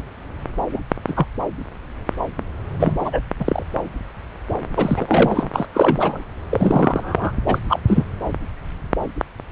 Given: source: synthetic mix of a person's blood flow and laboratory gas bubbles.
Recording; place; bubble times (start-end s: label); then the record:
Doppler ultrasound of blood flow; subclavian vein
0.71-0.80 s: bubbles
1.07-1.26 s: bubbles
2.79-2.93 s: bubbles
2.99-3.20 s: bubbles
3.40-3.62 s: bubbles
4.76-5.49 s: bubbles
5.54-5.66 s: bubbles
5.74-6.21 s: bubbles
6.50-7.32 s: bubbles
7.46-7.58 s: bubbles
7.68-7.79 s: bubbles
7.88-8.04 s: bubbles
From the record:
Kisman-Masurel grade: 223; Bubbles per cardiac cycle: several, 3 to 8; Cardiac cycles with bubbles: 10 to 50%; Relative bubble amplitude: loud (0.450 to 0.775); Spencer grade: 2 (many but less than half of the cardiac periods contain bubble signals, singularly or in groups); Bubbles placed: anywhere in the cardiac cycle